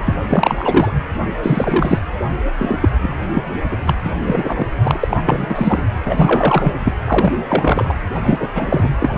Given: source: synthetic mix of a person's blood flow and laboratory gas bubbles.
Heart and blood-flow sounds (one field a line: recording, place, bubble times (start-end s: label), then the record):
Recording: Doppler ultrasound of blood flow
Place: precordium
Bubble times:
0.05-0.15 s: bubbles
0.30-0.91 s: bubbles
1.43-2.00 s: bubbles
2.58-2.89 s: bubbles
3.02-3.14 s: bubbles
3.34-3.43 s: bubbles
3.70-3.76 s: bubbles
3.86-3.95 s: bubbles
4.04-4.15 s: bubbles
4.26-4.70 s: bubbles
4.83-5.17 s: bubbles
5.26-5.88 s: bubbles
6.04-6.73 s: bubbles
6.79-6.92 s: bubbles
7.05-7.33 s: bubbles
7.48-7.93 s: bubbles
8.15-8.47 s: bubbles
8.55-8.89 s: bubbles
8.98-9.18 s: bubbles
From the record:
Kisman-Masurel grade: 343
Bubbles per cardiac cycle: rolling drumbeat, 9 or more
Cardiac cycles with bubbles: 100%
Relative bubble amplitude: loud (0.450 to 0.775)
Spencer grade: 3 (all of the cardiac periods contain showers or single bubble signals, but not dominating or overriding the cardiac motion signals)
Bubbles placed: anywhere in the cardiac cycle